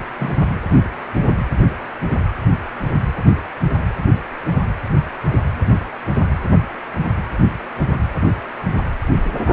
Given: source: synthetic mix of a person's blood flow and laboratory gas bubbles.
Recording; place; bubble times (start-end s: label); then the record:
Doppler ultrasound of blood flow; precordium
0.18-0.35 s: bubbles
From the record:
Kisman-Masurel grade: 113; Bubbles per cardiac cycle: 1 to 2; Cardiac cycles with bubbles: 1 to 10%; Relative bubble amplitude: loud (0.450 to 0.775); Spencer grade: 1 (occasional bubble signal discernible with the cardiac motion signal, with majority of cardiac periods free of bubbles); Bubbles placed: anywhere in the cardiac cycle